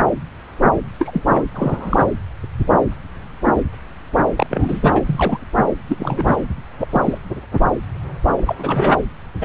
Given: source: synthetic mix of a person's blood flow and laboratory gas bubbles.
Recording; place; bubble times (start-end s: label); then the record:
Doppler ultrasound of blood flow; subclavian vein
0.99-1.24 s: bubbles
1.28-1.44 s: bubbles
1.54-2.06 s: bubbles
4.36-4.46 s: bubbles
4.50-5.01 s: bubbles
5.06-5.38 s: bubbles
5.87-6.36 s: bubbles
6.80-6.88 s: bubbles
6.92-7.02 s: bubbles
7.04-7.18 s: bubbles
8.37-8.54 s: bubbles
8.58-8.93 s: bubbles
9.41-9.45 s: bubbles
From the record:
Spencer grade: 3 (all of the cardiac periods contain showers or single bubble signals, but not dominating or overriding the cardiac motion signals); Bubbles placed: anywhere in the cardiac cycle